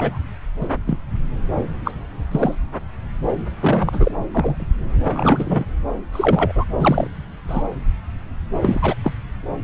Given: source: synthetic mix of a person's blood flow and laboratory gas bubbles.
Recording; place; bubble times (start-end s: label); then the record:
Doppler ultrasound of blood flow; subclavian vein
0.00-0.18 s: bubbles
0.60-0.68 s: bubbles
0.86-0.97 s: bubbles
1.84-1.92 s: bubbles
2.31-2.55 s: bubbles
3.60-4.12 s: bubbles
4.31-4.67 s: bubbles
5.04-5.65 s: bubbles
6.12-6.52 s: bubbles
6.55-6.64 s: bubbles
6.79-7.08 s: bubbles
7.48-7.63 s: bubbles
8.62-8.94 s: bubbles
9.03-9.12 s: bubbles
From the record:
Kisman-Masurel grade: 232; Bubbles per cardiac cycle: several, 3 to 8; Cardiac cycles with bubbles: 50 to 99%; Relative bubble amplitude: moderate (0.250 to 0.450); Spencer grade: 3 (all of the cardiac periods contain showers or single bubble signals, but not dominating or overriding the cardiac motion signals); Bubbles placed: anywhere in the cardiac cycle